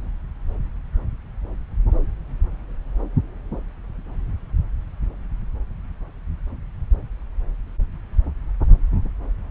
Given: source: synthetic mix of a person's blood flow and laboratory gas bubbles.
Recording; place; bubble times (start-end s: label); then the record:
Doppler ultrasound of blood flow; subclavian vein
no bubbles
From the record:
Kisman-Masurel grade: 000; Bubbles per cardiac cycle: 0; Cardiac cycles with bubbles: 0%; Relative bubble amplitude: no bubbles discernible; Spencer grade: 0 (complete lack of bubble signals)